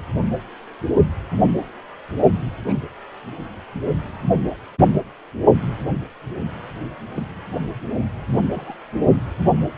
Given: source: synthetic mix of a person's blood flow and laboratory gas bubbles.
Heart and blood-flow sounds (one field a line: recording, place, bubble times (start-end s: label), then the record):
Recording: Doppler ultrasound of blood flow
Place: precordium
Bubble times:
2.67-2.75 s: bubbles
4.47-4.55 s: bubbles
7.15-7.26 s: bubbles
8.51-8.75 s: bubbles
From the record:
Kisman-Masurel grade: 121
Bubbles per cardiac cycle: 1 to 2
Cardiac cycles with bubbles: 10 to 50%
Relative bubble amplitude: barely perceptible (0.100 to 0.250)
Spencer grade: 2 (many but less than half of the cardiac periods contain bubble signals, singularly or in groups)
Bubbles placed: only in the low amplitude regions of the cardiac cycle